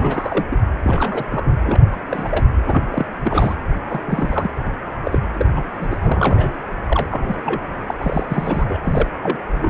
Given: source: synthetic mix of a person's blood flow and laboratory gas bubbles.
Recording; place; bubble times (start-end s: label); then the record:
Doppler ultrasound of blood flow; precordium
0.00-0.45 s: bubbles
0.50-0.58 s: bubbles
0.84-1.24 s: bubbles
1.30-1.54 s: bubbles
1.64-1.81 s: bubbles
1.93-1.96 s: bubbles
2.08-2.46 s: bubbles
2.67-2.83 s: bubbles
2.91-3.06 s: bubbles
3.25-3.56 s: bubbles
3.90-4.01 s: bubbles
4.06-4.50 s: bubbles
4.65-4.70 s: bubbles
5.05-5.18 s: bubbles
5.34-5.46 s: bubbles
5.55-5.97 s: bubbles
6.02-6.53 s: bubbles
6.88-7.59 s: bubbles
7.87-7.94 s: bubbles
7.99-8.26 s: bubbles
8.30-8.79 s: bubbles
8.84-9.10 s: bubbles
9.22-9.38 s: bubbles
9.55-9.70 s: bubbles
From the record:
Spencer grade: 3 (all of the cardiac periods contain showers or single bubble signals, but not dominating or overriding the cardiac motion signals); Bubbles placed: anywhere in the cardiac cycle